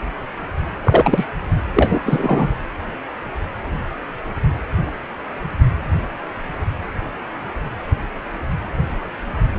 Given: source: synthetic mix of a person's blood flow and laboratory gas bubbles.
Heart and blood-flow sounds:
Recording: Doppler ultrasound of blood flow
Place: precordium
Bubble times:
0.83-1.26 s: bubbles
1.74-2.00 s: bubbles
2.06-2.49 s: bubbles
From the record:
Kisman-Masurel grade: 223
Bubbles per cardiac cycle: several, 3 to 8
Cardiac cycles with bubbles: 10 to 50%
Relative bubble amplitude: loud (0.450 to 0.775)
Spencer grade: 2 (many but less than half of the cardiac periods contain bubble signals, singularly or in groups)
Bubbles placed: anywhere in the cardiac cycle

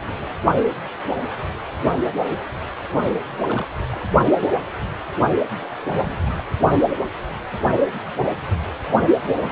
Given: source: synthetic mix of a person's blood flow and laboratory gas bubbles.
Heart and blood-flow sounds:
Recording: Doppler ultrasound of blood flow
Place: precordium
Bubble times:
3.44-3.73 s: bubbles
3.90-4.08 s: bubbles
5.61-5.66 s: bubbles
5.85-6.19 s: bubbles
6.25-6.44 s: bubbles
9.04-9.09 s: bubbles
9.33-9.52 s: bubbles
From the record:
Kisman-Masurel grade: 221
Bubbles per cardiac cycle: several, 3 to 8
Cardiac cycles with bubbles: 10 to 50%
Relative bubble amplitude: barely perceptible (0.100 to 0.250)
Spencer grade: 2 (many but less than half of the cardiac periods contain bubble signals, singularly or in groups)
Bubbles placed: only in the low amplitude regions of the cardiac cycle

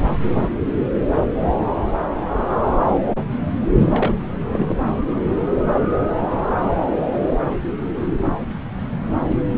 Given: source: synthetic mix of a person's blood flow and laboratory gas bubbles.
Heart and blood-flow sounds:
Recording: Doppler ultrasound of blood flow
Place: subclavian vein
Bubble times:
3.79-4.22 s: bubbles
4.52-4.75 s: bubbles
From the record:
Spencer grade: 1 (occasional bubble signal discernible with the cardiac motion signal, with majority of cardiac periods free of bubbles)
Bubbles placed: anywhere in the cardiac cycle

